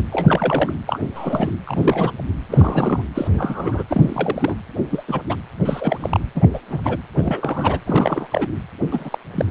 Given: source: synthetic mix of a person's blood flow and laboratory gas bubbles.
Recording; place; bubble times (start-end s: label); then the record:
Doppler ultrasound of blood flow; precordium
0.12-0.72 s: bubbles
0.86-1.00 s: bubbles
1.15-1.50 s: bubbles
1.67-2.12 s: bubbles
2.49-3.02 s: bubbles
3.15-3.27 s: bubbles
3.33-3.83 s: bubbles
3.88-4.55 s: bubbles
4.90-5.04 s: bubbles
5.08-5.22 s: bubbles
5.29-5.37 s: bubbles
5.65-6.20 s: bubbles
6.35-6.48 s: bubbles
6.54-6.60 s: bubbles
6.70-6.97 s: bubbles
7.16-7.79 s: bubbles
7.86-8.28 s: bubbles
8.30-8.47 s: bubbles
8.91-9.19 s: bubbles
9.36-9.45 s: bubbles
From the record:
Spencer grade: 3 (all of the cardiac periods contain showers or single bubble signals, but not dominating or overriding the cardiac motion signals); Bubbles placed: anywhere in the cardiac cycle